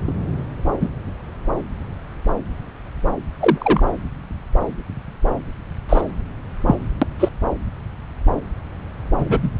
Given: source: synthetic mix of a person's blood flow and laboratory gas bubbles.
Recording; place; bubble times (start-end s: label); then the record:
Doppler ultrasound of blood flow; subclavian vein
0.07-0.14 s: bubbles
0.80-0.89 s: bubbles
3.40-3.94 s: bubbles
5.89-6.02 s: bubbles
6.67-6.76 s: bubbles
7.02-7.07 s: bubbles
7.20-7.29 s: bubbles
9.18-9.50 s: bubbles
From the record:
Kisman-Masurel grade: 123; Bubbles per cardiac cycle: 1 to 2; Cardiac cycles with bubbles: 10 to 50%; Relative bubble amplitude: loud (0.450 to 0.775); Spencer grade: 2 (many but less than half of the cardiac periods contain bubble signals, singularly or in groups); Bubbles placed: anywhere in the cardiac cycle